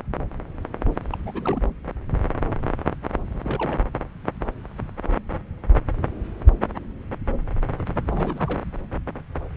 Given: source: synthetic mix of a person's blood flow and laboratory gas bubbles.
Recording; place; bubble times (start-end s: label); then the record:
Doppler ultrasound of blood flow; subclavian vein
1.12-1.18 s: bubbles
1.26-1.61 s: bubbles
3.33-3.81 s: bubbles
8.08-8.60 s: bubbles
From the record:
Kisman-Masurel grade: 221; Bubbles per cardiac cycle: several, 3 to 8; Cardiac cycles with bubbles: 10 to 50%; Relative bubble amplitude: barely perceptible (0.100 to 0.250); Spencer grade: 2 (many but less than half of the cardiac periods contain bubble signals, singularly or in groups); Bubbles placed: anywhere in the cardiac cycle